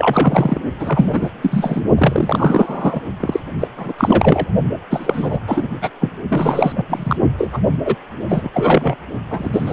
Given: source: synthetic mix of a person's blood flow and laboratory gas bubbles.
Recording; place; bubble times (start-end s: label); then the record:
Doppler ultrasound of blood flow; precordium
0.00-0.61 s: bubbles
0.79-1.29 s: bubbles
1.42-1.81 s: bubbles
1.98-3.01 s: bubbles
3.19-3.40 s: bubbles
3.58-3.67 s: bubbles
3.77-3.93 s: bubbles
3.97-4.47 s: bubbles
4.91-5.39 s: bubbles
5.47-5.67 s: bubbles
5.81-5.90 s: bubbles
6.00-6.09 s: bubbles
6.30-6.85 s: bubbles
6.88-7.17 s: bubbles
7.38-7.58 s: bubbles
7.85-7.96 s: bubbles
8.29-8.49 s: bubbles
8.54-8.96 s: bubbles
9.30-9.73 s: bubbles
From the record:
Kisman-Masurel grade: 343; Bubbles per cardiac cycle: rolling drumbeat, 9 or more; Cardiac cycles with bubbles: 100%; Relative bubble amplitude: loud (0.450 to 0.775); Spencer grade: 3 (all of the cardiac periods contain showers or single bubble signals, but not dominating or overriding the cardiac motion signals); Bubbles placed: only in the low amplitude regions of the cardiac cycle